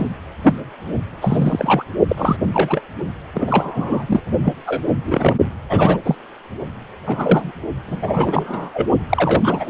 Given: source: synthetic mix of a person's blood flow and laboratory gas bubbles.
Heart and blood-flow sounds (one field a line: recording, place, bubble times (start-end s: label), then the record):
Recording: Doppler ultrasound of blood flow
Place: precordium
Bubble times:
0.00-0.09 s: bubbles
0.43-0.54 s: bubbles
1.21-1.84 s: bubbles
2.08-2.36 s: bubbles
2.50-2.82 s: bubbles
3.34-4.21 s: bubbles
4.43-4.54 s: bubbles
4.66-4.83 s: bubbles
5.04-5.35 s: bubbles
5.69-5.99 s: bubbles
6.05-6.17 s: bubbles
7.07-7.52 s: bubbles
7.88-8.70 s: bubbles
8.73-8.88 s: bubbles
9.09-9.70 s: bubbles
From the record:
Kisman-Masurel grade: 242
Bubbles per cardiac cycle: several, 3 to 8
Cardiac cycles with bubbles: 100%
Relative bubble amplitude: moderate (0.250 to 0.450)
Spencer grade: 3 (all of the cardiac periods contain showers or single bubble signals, but not dominating or overriding the cardiac motion signals)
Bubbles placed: only in the low amplitude regions of the cardiac cycle